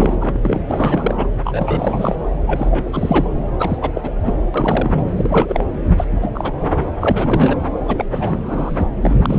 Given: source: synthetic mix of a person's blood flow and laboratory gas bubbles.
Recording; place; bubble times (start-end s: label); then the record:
Doppler ultrasound of blood flow; subclavian vein
0.00-0.39 s: bubbles
0.42-0.60 s: bubbles
0.68-1.27 s: bubbles
1.44-2.20 s: bubbles
2.46-3.29 s: bubbles
3.58-3.78 s: bubbles
3.81-3.92 s: bubbles
3.95-4.11 s: bubbles
4.21-4.46 s: bubbles
4.54-5.04 s: bubbles
5.17-5.64 s: bubbles
5.97-6.05 s: bubbles
6.14-6.31 s: bubbles
6.34-6.52 s: bubbles
6.59-6.70 s: bubbles
7.00-7.55 s: bubbles
7.86-8.07 s: bubbles
8.11-8.85 s: bubbles
8.96-9.39 s: bubbles
From the record:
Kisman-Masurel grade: 342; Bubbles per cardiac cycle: rolling drumbeat, 9 or more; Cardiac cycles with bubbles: 100%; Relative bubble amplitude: moderate (0.250 to 0.450); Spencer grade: 3 (all of the cardiac periods contain showers or single bubble signals, but not dominating or overriding the cardiac motion signals); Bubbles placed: anywhere in the cardiac cycle